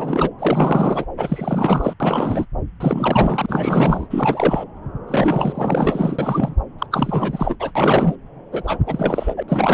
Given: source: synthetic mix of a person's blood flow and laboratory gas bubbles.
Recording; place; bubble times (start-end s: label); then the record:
Doppler ultrasound of blood flow; subclavian vein
0.00-0.30 s: bubbles
0.39-1.05 s: bubbles
1.17-1.94 s: bubbles
2.00-2.46 s: bubbles
2.80-4.08 s: bubbles
4.10-4.64 s: bubbles
5.08-6.54 s: bubbles
6.79-6.87 s: bubbles
6.91-7.55 s: bubbles
7.59-7.72 s: bubbles
7.75-8.15 s: bubbles
8.51-8.79 s: bubbles
8.86-9.43 s: bubbles
9.48-9.74 s: bubbles
From the record:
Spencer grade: 4 (maximum detectable bubble signal sounding continuously throughout systole and diastole of every cardiac period, and overriding the amplitude of the normal cardiac signals); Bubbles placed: anywhere in the cardiac cycle